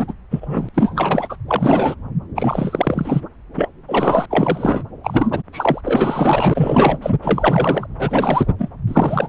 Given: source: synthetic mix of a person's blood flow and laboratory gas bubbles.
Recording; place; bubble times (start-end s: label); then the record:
Doppler ultrasound of blood flow; subclavian vein
0.00-0.14 s: bubbles
0.31-0.69 s: bubbles
0.74-1.36 s: bubbles
1.48-1.96 s: bubbles
2.35-3.21 s: bubbles
3.55-3.69 s: bubbles
3.88-4.27 s: bubbles
4.30-4.84 s: bubbles
5.04-5.43 s: bubbles
5.53-5.81 s: bubbles
5.86-6.98 s: bubbles
7.02-7.15 s: bubbles
7.21-7.87 s: bubbles
7.98-8.47 s: bubbles
8.58-8.69 s: bubbles
8.88-9.29 s: bubbles
From the record:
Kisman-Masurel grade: 343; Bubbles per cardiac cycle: rolling drumbeat, 9 or more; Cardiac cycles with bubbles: 100%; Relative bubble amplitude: loud (0.450 to 0.775); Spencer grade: 3 (all of the cardiac periods contain showers or single bubble signals, but not dominating or overriding the cardiac motion signals); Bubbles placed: anywhere in the cardiac cycle